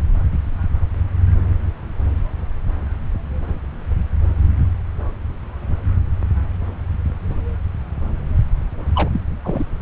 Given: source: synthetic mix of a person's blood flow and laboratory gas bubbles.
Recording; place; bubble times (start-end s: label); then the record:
Doppler ultrasound of blood flow; subclavian vein
8.95-9.09 s: bubbles
9.13-9.20 s: bubbles
9.43-9.65 s: bubbles
9.80-9.82 s: bubbles
From the record:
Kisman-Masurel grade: 212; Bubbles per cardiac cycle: several, 3 to 8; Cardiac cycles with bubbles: 1 to 10%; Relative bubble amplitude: moderate (0.250 to 0.450); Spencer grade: 1 (occasional bubble signal discernible with the cardiac motion signal, with majority of cardiac periods free of bubbles); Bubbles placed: anywhere in the cardiac cycle